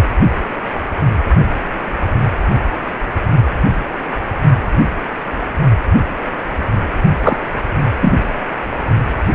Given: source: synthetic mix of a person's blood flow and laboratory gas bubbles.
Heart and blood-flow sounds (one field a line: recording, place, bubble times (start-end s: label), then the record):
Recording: Doppler ultrasound of blood flow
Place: precordium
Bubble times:
7.22-7.37 s: bubbles
8.02-8.12 s: bubbles
From the record:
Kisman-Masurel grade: 113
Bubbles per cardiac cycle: 1 to 2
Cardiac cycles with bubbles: 1 to 10%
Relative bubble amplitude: loud (0.450 to 0.775)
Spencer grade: 1 (occasional bubble signal discernible with the cardiac motion signal, with majority of cardiac periods free of bubbles)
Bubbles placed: only in the low amplitude regions of the cardiac cycle